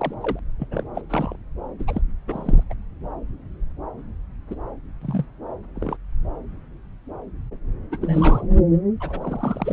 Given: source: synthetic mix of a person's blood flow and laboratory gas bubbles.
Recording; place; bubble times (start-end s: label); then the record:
Doppler ultrasound of blood flow; subclavian vein
0.00-0.14 s: bubbles
0.21-0.40 s: bubbles
0.58-0.67 s: bubbles
0.71-0.86 s: bubbles
0.95-1.01 s: bubbles
1.09-1.35 s: bubbles
1.78-2.01 s: bubbles
2.27-2.63 s: bubbles
2.69-2.73 s: bubbles
4.50-4.56 s: bubbles
5.02-5.26 s: bubbles
5.76-5.97 s: bubbles
7.92-7.99 s: bubbles
8.02-8.43 s: bubbles
9.00-9.73 s: bubbles
From the record:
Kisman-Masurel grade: 232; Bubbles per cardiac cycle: several, 3 to 8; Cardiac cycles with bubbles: 50 to 99%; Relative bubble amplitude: moderate (0.250 to 0.450); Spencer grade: 3 (all of the cardiac periods contain showers or single bubble signals, but not dominating or overriding the cardiac motion signals); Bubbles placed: anywhere in the cardiac cycle